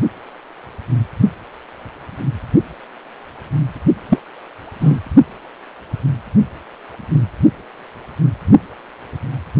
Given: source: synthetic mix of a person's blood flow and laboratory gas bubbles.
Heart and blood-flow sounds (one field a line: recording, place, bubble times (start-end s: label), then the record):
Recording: Doppler ultrasound of blood flow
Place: precordium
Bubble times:
4.09-4.19 s: bubbles
4.80-5.00 s: bubbles
From the record:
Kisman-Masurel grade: 123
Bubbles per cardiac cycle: 1 to 2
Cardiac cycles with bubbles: 10 to 50%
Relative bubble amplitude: loud (0.450 to 0.775)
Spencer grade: 2 (many but less than half of the cardiac periods contain bubble signals, singularly or in groups)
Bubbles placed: only in the low amplitude regions of the cardiac cycle